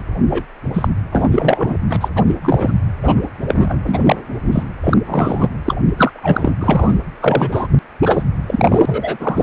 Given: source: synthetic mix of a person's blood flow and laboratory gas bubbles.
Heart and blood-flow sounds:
Doppler ultrasound of blood flow; precordium
0.00-0.02 s: bubbles
0.30-0.43 s: bubbles
0.73-0.89 s: bubbles
1.12-1.28 s: bubbles
1.31-1.76 s: bubbles
1.88-1.97 s: bubbles
2.01-2.08 s: bubbles
2.15-2.23 s: bubbles
2.27-2.35 s: bubbles
2.42-2.74 s: bubbles
3.03-3.23 s: bubbles
3.38-3.80 s: bubbles
3.86-4.16 s: bubbles
4.52-4.63 s: bubbles
4.83-4.98 s: bubbles
5.06-5.49 s: bubbles
5.65-5.75 s: bubbles
5.96-6.52 s: bubbles
6.61-7.00 s: bubbles
7.21-7.67 s: bubbles
8.02-8.22 s: bubbles
8.47-9.17 s: bubbles
9.20-9.43 s: bubbles
From the record:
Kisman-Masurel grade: 243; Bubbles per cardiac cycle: several, 3 to 8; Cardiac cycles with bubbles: 100%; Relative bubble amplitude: loud (0.450 to 0.775); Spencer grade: 3 (all of the cardiac periods contain showers or single bubble signals, but not dominating or overriding the cardiac motion signals); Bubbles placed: anywhere in the cardiac cycle

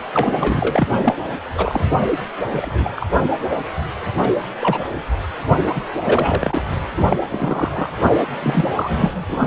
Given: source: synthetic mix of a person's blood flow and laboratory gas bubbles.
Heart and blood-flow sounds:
Doppler ultrasound of blood flow; precordium
0.00-0.02 s: bubbles
0.12-0.88 s: bubbles
1.02-1.15 s: bubbles
1.54-1.85 s: bubbles
2.53-2.90 s: bubbles
2.96-3.08 s: bubbles
3.49-3.57 s: bubbles
4.19-4.33 s: bubbles
4.61-4.88 s: bubbles
5.67-5.72 s: bubbles
5.75-5.81 s: bubbles
6.02-6.62 s: bubbles
6.97-7.17 s: bubbles
7.29-7.89 s: bubbles
8.42-8.68 s: bubbles
8.73-9.25 s: bubbles
9.28-9.47 s: bubbles
From the record:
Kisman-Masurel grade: 243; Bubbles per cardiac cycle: several, 3 to 8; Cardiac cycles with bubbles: 100%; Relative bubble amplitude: loud (0.450 to 0.775); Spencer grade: 3 (all of the cardiac periods contain showers or single bubble signals, but not dominating or overriding the cardiac motion signals); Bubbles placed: anywhere in the cardiac cycle

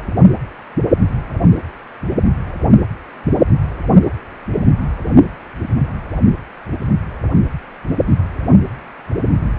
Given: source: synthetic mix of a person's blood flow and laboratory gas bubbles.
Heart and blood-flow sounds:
Doppler ultrasound of blood flow; precordium
no bubbles
From the record:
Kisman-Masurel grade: 000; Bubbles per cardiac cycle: 0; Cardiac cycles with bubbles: 0%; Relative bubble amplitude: no bubbles discernible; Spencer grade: 0 (complete lack of bubble signals)

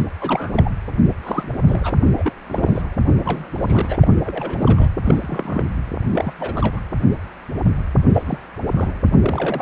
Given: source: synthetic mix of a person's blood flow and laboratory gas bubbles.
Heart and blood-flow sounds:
Doppler ultrasound of blood flow; precordium
0.00-0.04 s: bubbles
0.20-0.71 s: bubbles
1.08-1.14 s: bubbles
1.23-1.49 s: bubbles
1.68-1.94 s: bubbles
2.16-2.32 s: bubbles
2.48-2.82 s: bubbles
3.05-3.98 s: bubbles
4.01-4.08 s: bubbles
4.25-4.89 s: bubbles
5.04-5.67 s: bubbles
6.10-6.33 s: bubbles
6.38-6.80 s: bubbles
8.13-8.22 s: bubbles
8.26-8.38 s: bubbles
8.71-8.98 s: bubbles
9.21-9.62 s: bubbles
From the record:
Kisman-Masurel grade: 232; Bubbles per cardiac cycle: several, 3 to 8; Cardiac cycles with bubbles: 50 to 99%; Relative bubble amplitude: moderate (0.250 to 0.450); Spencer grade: 3 (all of the cardiac periods contain showers or single bubble signals, but not dominating or overriding the cardiac motion signals); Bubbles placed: anywhere in the cardiac cycle

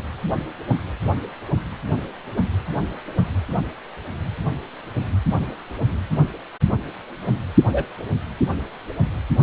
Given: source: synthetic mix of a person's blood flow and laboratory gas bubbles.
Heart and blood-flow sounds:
Doppler ultrasound of blood flow; precordium
7.72-7.85 s: bubbles
From the record:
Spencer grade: 1 (occasional bubble signal discernible with the cardiac motion signal, with majority of cardiac periods free of bubbles); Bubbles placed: anywhere in the cardiac cycle

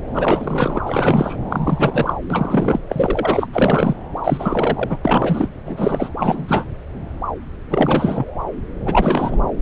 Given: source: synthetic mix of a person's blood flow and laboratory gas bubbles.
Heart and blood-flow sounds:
Doppler ultrasound of blood flow; subclavian vein
0.14-0.81 s: bubbles
0.86-1.36 s: bubbles
1.49-2.14 s: bubbles
2.30-2.80 s: bubbles
2.89-3.48 s: bubbles
3.52-3.96 s: bubbles
4.24-4.99 s: bubbles
5.04-5.49 s: bubbles
5.65-6.09 s: bubbles
6.17-6.67 s: bubbles
7.69-8.25 s: bubbles
8.85-9.36 s: bubbles
From the record:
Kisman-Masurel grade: 333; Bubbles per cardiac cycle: rolling drumbeat, 9 or more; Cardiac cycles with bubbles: 50 to 99%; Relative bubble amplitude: loud (0.450 to 0.775); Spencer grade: 3 (all of the cardiac periods contain showers or single bubble signals, but not dominating or overriding the cardiac motion signals); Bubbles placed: anywhere in the cardiac cycle

